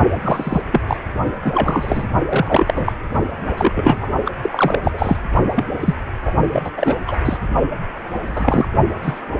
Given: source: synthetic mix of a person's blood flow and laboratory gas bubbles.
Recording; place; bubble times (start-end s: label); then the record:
Doppler ultrasound of blood flow; precordium
0.22-0.62 s: bubbles
0.72-0.81 s: bubbles
0.87-0.97 s: bubbles
1.44-2.06 s: bubbles
2.29-2.93 s: bubbles
3.44-4.07 s: bubbles
4.25-4.31 s: bubbles
4.42-4.79 s: bubbles
4.83-5.17 s: bubbles
5.54-5.64 s: bubbles
5.79-5.94 s: bubbles
6.25-6.32 s: bubbles
6.51-6.71 s: bubbles
6.77-6.96 s: bubbles
7.07-7.17 s: bubbles
7.24-7.38 s: bubbles
8.27-8.69 s: bubbles
9.02-9.21 s: bubbles
From the record:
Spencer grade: 3 (all of the cardiac periods contain showers or single bubble signals, but not dominating or overriding the cardiac motion signals); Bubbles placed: only in the low amplitude regions of the cardiac cycle